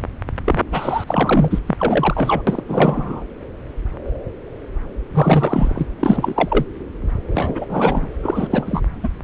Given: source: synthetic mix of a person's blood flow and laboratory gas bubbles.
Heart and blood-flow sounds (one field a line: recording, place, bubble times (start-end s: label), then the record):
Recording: Doppler ultrasound of blood flow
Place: subclavian vein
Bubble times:
0.45-0.62 s: bubbles
0.72-1.04 s: bubbles
1.07-1.58 s: bubbles
1.66-2.42 s: bubbles
2.47-2.62 s: bubbles
2.68-3.25 s: bubbles
5.13-5.87 s: bubbles
6.00-6.65 s: bubbles
7.25-7.66 s: bubbles
7.69-8.09 s: bubbles
8.22-8.81 s: bubbles
9.03-9.09 s: bubbles
From the record:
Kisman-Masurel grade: 333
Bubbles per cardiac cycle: rolling drumbeat, 9 or more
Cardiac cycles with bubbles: 50 to 99%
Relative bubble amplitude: loud (0.450 to 0.775)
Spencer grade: 3 (all of the cardiac periods contain showers or single bubble signals, but not dominating or overriding the cardiac motion signals)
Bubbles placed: anywhere in the cardiac cycle